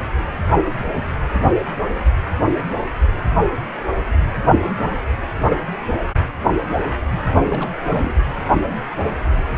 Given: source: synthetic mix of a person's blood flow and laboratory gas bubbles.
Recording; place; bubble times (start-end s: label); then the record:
Doppler ultrasound of blood flow; precordium
7.12-7.17 s: bubbles
7.38-7.79 s: bubbles
7.90-8.14 s: bubbles
From the record:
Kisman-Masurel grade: 211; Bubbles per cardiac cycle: several, 3 to 8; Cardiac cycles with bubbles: 1 to 10%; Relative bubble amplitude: barely perceptible (0.100 to 0.250); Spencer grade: 1 (occasional bubble signal discernible with the cardiac motion signal, with majority of cardiac periods free of bubbles); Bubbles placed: anywhere in the cardiac cycle